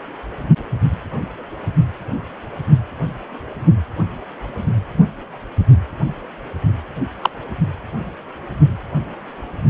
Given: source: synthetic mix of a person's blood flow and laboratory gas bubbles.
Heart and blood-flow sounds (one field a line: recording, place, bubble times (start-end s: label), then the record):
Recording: Doppler ultrasound of blood flow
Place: precordium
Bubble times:
7.21-7.30 s: bubbles
From the record:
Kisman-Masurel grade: 123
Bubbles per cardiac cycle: 1 to 2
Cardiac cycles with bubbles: 10 to 50%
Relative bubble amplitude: loud (0.450 to 0.775)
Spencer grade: 2 (many but less than half of the cardiac periods contain bubble signals, singularly or in groups)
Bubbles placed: only in the low amplitude regions of the cardiac cycle